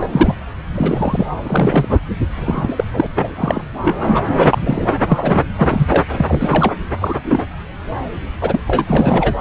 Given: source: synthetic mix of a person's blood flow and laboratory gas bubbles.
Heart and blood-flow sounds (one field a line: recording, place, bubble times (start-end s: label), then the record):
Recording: Doppler ultrasound of blood flow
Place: subclavian vein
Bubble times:
0.00-0.08 s: bubbles
0.11-0.34 s: bubbles
0.74-1.26 s: bubbles
1.43-2.00 s: bubbles
2.36-2.84 s: bubbles
2.93-3.06 s: bubbles
3.15-3.35 s: bubbles
3.37-3.61 s: bubbles
3.82-4.22 s: bubbles
4.38-4.95 s: bubbles
5.11-5.43 s: bubbles
5.56-5.87 s: bubbles
5.89-6.05 s: bubbles
6.16-6.73 s: bubbles
7.01-7.15 s: bubbles
7.24-7.44 s: bubbles
8.41-8.61 s: bubbles
8.67-9.35 s: bubbles
From the record:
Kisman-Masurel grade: 233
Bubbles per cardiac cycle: several, 3 to 8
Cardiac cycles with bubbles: 50 to 99%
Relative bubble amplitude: loud (0.450 to 0.775)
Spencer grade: 3 (all of the cardiac periods contain showers or single bubble signals, but not dominating or overriding the cardiac motion signals)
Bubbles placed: anywhere in the cardiac cycle